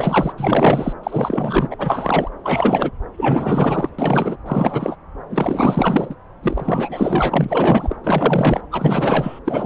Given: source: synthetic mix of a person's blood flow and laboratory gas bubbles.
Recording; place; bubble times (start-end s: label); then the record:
Doppler ultrasound of blood flow; subclavian vein
0.00-0.33 s: bubbles
0.37-0.93 s: bubbles
1.03-2.30 s: bubbles
2.43-2.90 s: bubbles
3.17-3.90 s: bubbles
3.99-4.38 s: bubbles
4.46-4.96 s: bubbles
5.29-6.15 s: bubbles
6.42-7.97 s: bubbles
8.04-8.61 s: bubbles
8.71-9.40 s: bubbles
9.45-9.66 s: bubbles
From the record:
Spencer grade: 4 (maximum detectable bubble signal sounding continuously throughout systole and diastole of every cardiac period, and overriding the amplitude of the normal cardiac signals); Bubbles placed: anywhere in the cardiac cycle